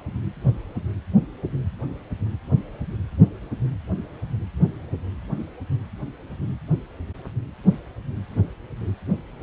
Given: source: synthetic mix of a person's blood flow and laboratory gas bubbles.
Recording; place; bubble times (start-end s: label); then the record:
Doppler ultrasound of blood flow; precordium
no bubbles
From the record:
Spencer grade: 0 (complete lack of bubble signals)